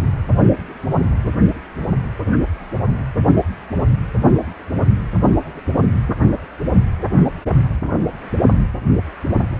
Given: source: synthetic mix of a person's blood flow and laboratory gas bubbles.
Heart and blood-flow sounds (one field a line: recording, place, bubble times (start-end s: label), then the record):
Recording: Doppler ultrasound of blood flow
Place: precordium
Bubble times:
no bubbles
From the record:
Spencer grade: 0 (complete lack of bubble signals)